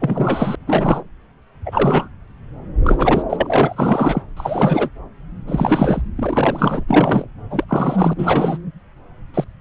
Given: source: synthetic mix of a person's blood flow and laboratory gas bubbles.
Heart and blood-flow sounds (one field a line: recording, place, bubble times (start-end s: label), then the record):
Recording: Doppler ultrasound of blood flow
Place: subclavian vein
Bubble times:
0.00-0.55 s: bubbles
0.67-1.04 s: bubbles
1.65-2.08 s: bubbles
2.84-3.23 s: bubbles
3.29-4.22 s: bubbles
4.37-4.89 s: bubbles
5.47-6.02 s: bubbles
6.16-6.84 s: bubbles
6.88-7.27 s: bubbles
7.51-7.65 s: bubbles
7.69-8.13 s: bubbles
8.18-8.57 s: bubbles
9.34-9.44 s: bubbles
From the record:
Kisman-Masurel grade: 333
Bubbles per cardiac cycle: rolling drumbeat, 9 or more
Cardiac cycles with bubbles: 50 to 99%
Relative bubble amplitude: loud (0.450 to 0.775)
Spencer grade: 3 (all of the cardiac periods contain showers or single bubble signals, but not dominating or overriding the cardiac motion signals)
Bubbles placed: anywhere in the cardiac cycle